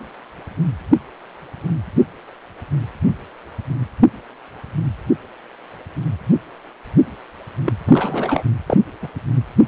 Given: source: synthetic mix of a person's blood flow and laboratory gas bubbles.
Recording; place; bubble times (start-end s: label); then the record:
Doppler ultrasound of blood flow; precordium
7.66-7.72 s: bubbles
7.84-8.44 s: bubbles
8.66-8.78 s: bubbles
9.02-9.08 s: bubbles
From the record:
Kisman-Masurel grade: 212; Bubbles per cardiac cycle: several, 3 to 8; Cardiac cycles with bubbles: 1 to 10%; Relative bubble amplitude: moderate (0.250 to 0.450); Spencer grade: 1 (occasional bubble signal discernible with the cardiac motion signal, with majority of cardiac periods free of bubbles); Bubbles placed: anywhere in the cardiac cycle